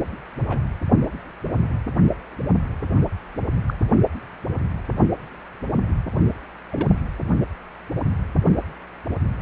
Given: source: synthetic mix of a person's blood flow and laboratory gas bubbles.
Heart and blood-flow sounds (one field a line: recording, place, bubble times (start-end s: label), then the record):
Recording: Doppler ultrasound of blood flow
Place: precordium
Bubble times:
0.48-0.59 s: bubbles
3.67-3.74 s: bubbles
6.71-7.00 s: bubbles
From the record:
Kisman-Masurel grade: 121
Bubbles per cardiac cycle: 1 to 2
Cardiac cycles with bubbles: 10 to 50%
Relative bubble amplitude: barely perceptible (0.100 to 0.250)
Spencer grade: 2 (many but less than half of the cardiac periods contain bubble signals, singularly or in groups)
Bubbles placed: only in the low amplitude regions of the cardiac cycle